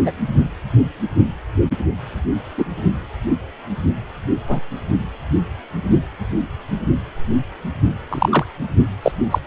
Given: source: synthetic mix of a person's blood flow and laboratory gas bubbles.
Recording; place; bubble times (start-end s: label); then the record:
Doppler ultrasound of blood flow; precordium
0.05-0.12 s: bubbles
2.58-2.65 s: bubbles
4.47-4.60 s: bubbles
8.09-8.45 s: bubbles
9.02-9.12 s: bubbles
9.30-9.38 s: bubbles
From the record:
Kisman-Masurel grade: 123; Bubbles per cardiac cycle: 1 to 2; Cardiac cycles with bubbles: 10 to 50%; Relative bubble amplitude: loud (0.450 to 0.775); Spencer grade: 2 (many but less than half of the cardiac periods contain bubble signals, singularly or in groups); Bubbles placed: only in the low amplitude regions of the cardiac cycle